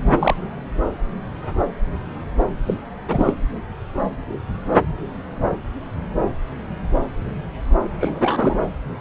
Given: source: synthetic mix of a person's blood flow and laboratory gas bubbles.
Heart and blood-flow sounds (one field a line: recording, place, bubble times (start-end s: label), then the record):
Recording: Doppler ultrasound of blood flow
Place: subclavian vein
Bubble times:
0.00-0.36 s: bubbles
2.40-2.46 s: bubbles
2.66-2.77 s: bubbles
3.08-3.33 s: bubbles
8.00-8.57 s: bubbles
From the record:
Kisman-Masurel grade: 222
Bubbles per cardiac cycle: several, 3 to 8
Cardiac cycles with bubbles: 10 to 50%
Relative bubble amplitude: moderate (0.250 to 0.450)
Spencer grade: 2 (many but less than half of the cardiac periods contain bubble signals, singularly or in groups)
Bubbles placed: anywhere in the cardiac cycle